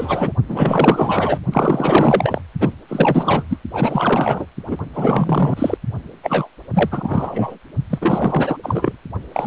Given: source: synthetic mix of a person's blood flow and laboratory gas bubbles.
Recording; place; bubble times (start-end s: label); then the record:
Doppler ultrasound of blood flow; precordium
0.00-0.32 s: bubbles
0.47-1.39 s: bubbles
1.51-2.42 s: bubbles
2.60-2.73 s: bubbles
2.89-3.44 s: bubbles
3.50-3.58 s: bubbles
3.73-4.46 s: bubbles
4.67-4.77 s: bubbles
4.93-5.78 s: bubbles
6.23-6.48 s: bubbles
6.74-7.55 s: bubbles
7.90-8.56 s: bubbles
8.63-8.97 s: bubbles
9.32-9.47 s: bubbles
From the record:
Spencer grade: 4 (maximum detectable bubble signal sounding continuously throughout systole and diastole of every cardiac period, and overriding the amplitude of the normal cardiac signals); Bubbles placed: only in the low amplitude regions of the cardiac cycle